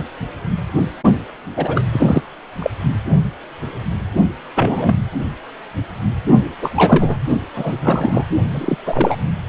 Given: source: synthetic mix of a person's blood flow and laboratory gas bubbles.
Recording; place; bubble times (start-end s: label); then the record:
Doppler ultrasound of blood flow; precordium
1.51-1.82 s: bubbles
1.92-2.21 s: bubbles
2.59-2.71 s: bubbles
4.55-4.94 s: bubbles
6.62-7.19 s: bubbles
7.55-8.26 s: bubbles
8.51-8.76 s: bubbles
8.85-9.18 s: bubbles
From the record:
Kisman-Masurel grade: 233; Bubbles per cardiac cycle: several, 3 to 8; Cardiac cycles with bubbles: 50 to 99%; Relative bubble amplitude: loud (0.450 to 0.775); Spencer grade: 3 (all of the cardiac periods contain showers or single bubble signals, but not dominating or overriding the cardiac motion signals); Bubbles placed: only in the low amplitude regions of the cardiac cycle